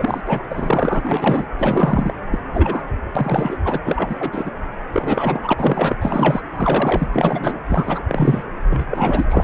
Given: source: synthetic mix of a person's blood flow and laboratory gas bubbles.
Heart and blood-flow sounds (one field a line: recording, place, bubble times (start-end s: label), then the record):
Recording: Doppler ultrasound of blood flow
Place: precordium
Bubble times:
0.00-0.20 s: bubbles
0.26-0.44 s: bubbles
0.51-1.01 s: bubbles
1.05-1.46 s: bubbles
1.59-2.12 s: bubbles
2.31-2.38 s: bubbles
2.53-2.82 s: bubbles
3.15-3.57 s: bubbles
3.64-3.78 s: bubbles
3.85-4.30 s: bubbles
4.33-4.50 s: bubbles
4.92-5.54 s: bubbles
5.58-5.95 s: bubbles
6.00-6.41 s: bubbles
6.55-7.08 s: bubbles
7.13-7.60 s: bubbles
7.70-8.02 s: bubbles
8.08-8.43 s: bubbles
8.70-8.86 s: bubbles
8.90-9.25 s: bubbles
9.30-9.44 s: bubbles
From the record:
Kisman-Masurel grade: 242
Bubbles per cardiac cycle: several, 3 to 8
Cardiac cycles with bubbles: 100%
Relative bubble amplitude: moderate (0.250 to 0.450)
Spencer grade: 3 (all of the cardiac periods contain showers or single bubble signals, but not dominating or overriding the cardiac motion signals)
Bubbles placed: anywhere in the cardiac cycle